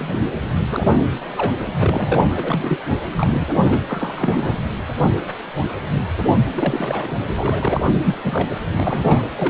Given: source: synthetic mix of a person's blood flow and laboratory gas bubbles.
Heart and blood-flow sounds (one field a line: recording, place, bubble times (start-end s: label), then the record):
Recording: Doppler ultrasound of blood flow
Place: precordium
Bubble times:
0.00-0.32 s: bubbles
0.69-1.19 s: bubbles
1.27-1.73 s: bubbles
1.79-2.80 s: bubbles
3.16-3.44 s: bubbles
3.52-3.83 s: bubbles
3.88-4.60 s: bubbles
6.54-7.12 s: bubbles
7.37-7.89 s: bubbles
8.03-8.16 s: bubbles
8.24-8.54 s: bubbles
8.77-9.23 s: bubbles
9.37-9.50 s: bubbles
From the record:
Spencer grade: 3 (all of the cardiac periods contain showers or single bubble signals, but not dominating or overriding the cardiac motion signals)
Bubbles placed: anywhere in the cardiac cycle